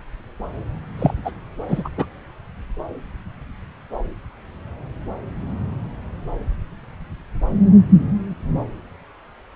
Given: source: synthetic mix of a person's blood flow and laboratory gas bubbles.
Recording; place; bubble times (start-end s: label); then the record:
Doppler ultrasound of blood flow; subclavian vein
0.98-1.14 s: bubbles
1.24-1.31 s: bubbles
1.68-1.89 s: bubbles
1.96-2.06 s: bubbles
From the record:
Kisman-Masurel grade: 213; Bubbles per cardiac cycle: several, 3 to 8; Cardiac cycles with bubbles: 1 to 10%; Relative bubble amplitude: loud (0.450 to 0.775); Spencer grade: 1 (occasional bubble signal discernible with the cardiac motion signal, with majority of cardiac periods free of bubbles); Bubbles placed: anywhere in the cardiac cycle